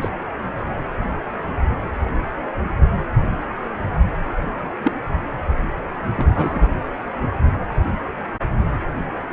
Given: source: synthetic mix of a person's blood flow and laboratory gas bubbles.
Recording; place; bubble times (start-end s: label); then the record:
Doppler ultrasound of blood flow; precordium
0.01-0.09 s: bubbles
4.83-4.93 s: bubbles
6.16-6.68 s: bubbles
From the record:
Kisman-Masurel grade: 123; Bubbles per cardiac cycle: 1 to 2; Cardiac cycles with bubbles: 10 to 50%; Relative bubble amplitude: loud (0.450 to 0.775); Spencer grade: 2 (many but less than half of the cardiac periods contain bubble signals, singularly or in groups); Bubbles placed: anywhere in the cardiac cycle